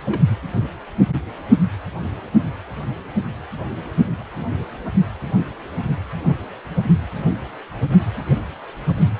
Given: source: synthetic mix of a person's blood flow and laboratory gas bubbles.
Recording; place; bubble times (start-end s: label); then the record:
Doppler ultrasound of blood flow; precordium
0.05-0.21 s: bubbles
6.29-6.35 s: bubbles
From the record:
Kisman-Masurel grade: 121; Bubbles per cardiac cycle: 1 to 2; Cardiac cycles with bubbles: 10 to 50%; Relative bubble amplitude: barely perceptible (0.100 to 0.250); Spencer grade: 2 (many but less than half of the cardiac periods contain bubble signals, singularly or in groups); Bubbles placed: anywhere in the cardiac cycle